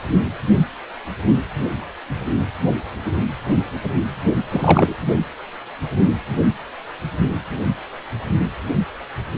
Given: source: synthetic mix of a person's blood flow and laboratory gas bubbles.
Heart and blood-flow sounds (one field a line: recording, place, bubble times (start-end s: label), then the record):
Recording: Doppler ultrasound of blood flow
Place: precordium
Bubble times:
4.50-4.96 s: bubbles
From the record:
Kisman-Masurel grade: 212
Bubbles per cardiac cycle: several, 3 to 8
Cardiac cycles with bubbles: 1 to 10%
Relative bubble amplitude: moderate (0.250 to 0.450)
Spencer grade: 1 (occasional bubble signal discernible with the cardiac motion signal, with majority of cardiac periods free of bubbles)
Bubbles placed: anywhere in the cardiac cycle